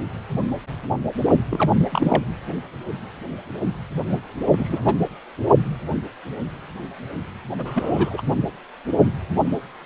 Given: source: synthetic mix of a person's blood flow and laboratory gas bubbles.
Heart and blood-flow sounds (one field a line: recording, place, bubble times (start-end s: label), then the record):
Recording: Doppler ultrasound of blood flow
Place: precordium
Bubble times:
1.50-1.71 s: bubbles
1.79-1.89 s: bubbles
1.92-2.24 s: bubbles
4.09-4.20 s: bubbles
4.52-4.80 s: bubbles
4.84-4.95 s: bubbles
7.58-8.21 s: bubbles
From the record:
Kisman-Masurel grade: 222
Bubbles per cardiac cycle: several, 3 to 8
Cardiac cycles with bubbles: 10 to 50%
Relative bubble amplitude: moderate (0.250 to 0.450)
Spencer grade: 2 (many but less than half of the cardiac periods contain bubble signals, singularly or in groups)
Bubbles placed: only in the low amplitude regions of the cardiac cycle